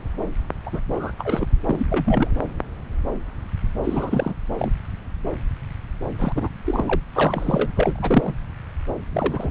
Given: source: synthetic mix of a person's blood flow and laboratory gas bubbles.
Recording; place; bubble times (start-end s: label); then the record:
Doppler ultrasound of blood flow; subclavian vein
0.66-0.80 s: bubbles
0.95-1.12 s: bubbles
1.19-1.47 s: bubbles
1.64-1.86 s: bubbles
1.89-2.28 s: bubbles
3.84-4.34 s: bubbles
4.59-4.72 s: bubbles
6.18-6.32 s: bubbles
6.35-6.49 s: bubbles
6.64-7.00 s: bubbles
7.14-7.69 s: bubbles
7.75-8.33 s: bubbles
9.12-9.51 s: bubbles
From the record:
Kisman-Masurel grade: 332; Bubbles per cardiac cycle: rolling drumbeat, 9 or more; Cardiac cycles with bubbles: 50 to 99%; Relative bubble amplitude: moderate (0.250 to 0.450); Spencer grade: 3 (all of the cardiac periods contain showers or single bubble signals, but not dominating or overriding the cardiac motion signals); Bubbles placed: anywhere in the cardiac cycle